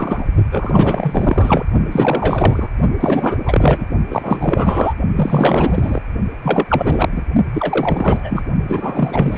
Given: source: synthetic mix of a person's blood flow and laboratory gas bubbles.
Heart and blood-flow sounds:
Doppler ultrasound of blood flow; precordium
0.00-0.27 s: bubbles
0.52-1.65 s: bubbles
1.92-2.68 s: bubbles
3.00-3.37 s: bubbles
3.44-3.87 s: bubbles
4.09-4.94 s: bubbles
5.16-6.03 s: bubbles
6.42-6.65 s: bubbles
6.69-7.09 s: bubbles
7.12-7.22 s: bubbles
7.54-8.44 s: bubbles
8.68-9.38 s: bubbles
From the record:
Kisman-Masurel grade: 444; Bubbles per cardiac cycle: continuous sound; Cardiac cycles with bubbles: 100%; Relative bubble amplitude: maximal (0.775 to 0.999); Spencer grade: 4 (maximum detectable bubble signal sounding continuously throughout systole and diastole of every cardiac period, and overriding the amplitude of the normal cardiac signals); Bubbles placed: only in the low amplitude regions of the cardiac cycle

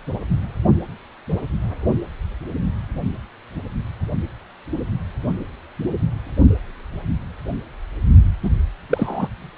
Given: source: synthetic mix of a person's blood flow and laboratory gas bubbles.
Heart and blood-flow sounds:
Doppler ultrasound of blood flow; precordium
8.43-8.51 s: bubbles
8.89-9.28 s: bubbles
From the record:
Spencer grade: 1 (occasional bubble signal discernible with the cardiac motion signal, with majority of cardiac periods free of bubbles); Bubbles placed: only in the low amplitude regions of the cardiac cycle

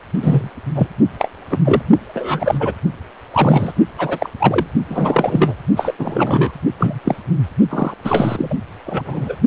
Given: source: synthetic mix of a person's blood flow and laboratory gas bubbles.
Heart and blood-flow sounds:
Doppler ultrasound of blood flow; precordium
0.22-0.50 s: bubbles
0.74-0.87 s: bubbles
1.19-1.28 s: bubbles
1.50-1.58 s: bubbles
1.64-1.82 s: bubbles
2.14-2.73 s: bubbles
3.33-3.72 s: bubbles
3.98-4.29 s: bubbles
4.38-4.67 s: bubbles
4.89-5.54 s: bubbles
5.76-5.93 s: bubbles
5.98-6.52 s: bubbles
6.79-6.99 s: bubbles
7.04-7.15 s: bubbles
7.69-7.94 s: bubbles
8.04-8.56 s: bubbles
8.86-9.02 s: bubbles
9.04-9.38 s: bubbles
From the record:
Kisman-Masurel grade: 243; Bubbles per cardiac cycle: several, 3 to 8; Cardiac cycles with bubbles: 100%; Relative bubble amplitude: loud (0.450 to 0.775); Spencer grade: 3 (all of the cardiac periods contain showers or single bubble signals, but not dominating or overriding the cardiac motion signals); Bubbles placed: only in the low amplitude regions of the cardiac cycle

